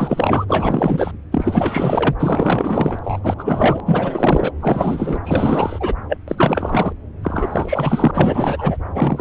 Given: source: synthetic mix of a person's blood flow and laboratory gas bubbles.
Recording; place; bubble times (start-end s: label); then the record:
Doppler ultrasound of blood flow; subclavian vein
0.00-0.46 s: bubbles
0.48-1.11 s: bubbles
1.31-2.15 s: bubbles
2.19-2.99 s: bubbles
3.04-3.20 s: bubbles
3.23-3.81 s: bubbles
3.86-4.51 s: bubbles
4.60-5.19 s: bubbles
5.25-5.94 s: bubbles
6.08-6.17 s: bubbles
6.27-6.92 s: bubbles
7.23-8.11 s: bubbles
8.13-8.77 s: bubbles
8.94-9.21 s: bubbles
From the record:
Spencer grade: 4 (maximum detectable bubble signal sounding continuously throughout systole and diastole of every cardiac period, and overriding the amplitude of the normal cardiac signals); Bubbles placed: anywhere in the cardiac cycle